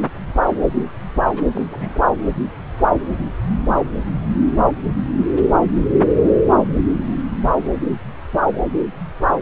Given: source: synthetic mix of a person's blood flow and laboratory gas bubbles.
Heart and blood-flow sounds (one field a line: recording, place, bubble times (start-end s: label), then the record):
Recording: Doppler ultrasound of blood flow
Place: subclavian vein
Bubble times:
1.35-1.42 s: bubbles
1.55-1.67 s: bubbles
1.71-1.99 s: bubbles
From the record:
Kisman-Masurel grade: 211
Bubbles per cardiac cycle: several, 3 to 8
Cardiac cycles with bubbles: 1 to 10%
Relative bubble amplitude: barely perceptible (0.100 to 0.250)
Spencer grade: 1 (occasional bubble signal discernible with the cardiac motion signal, with majority of cardiac periods free of bubbles)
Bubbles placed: anywhere in the cardiac cycle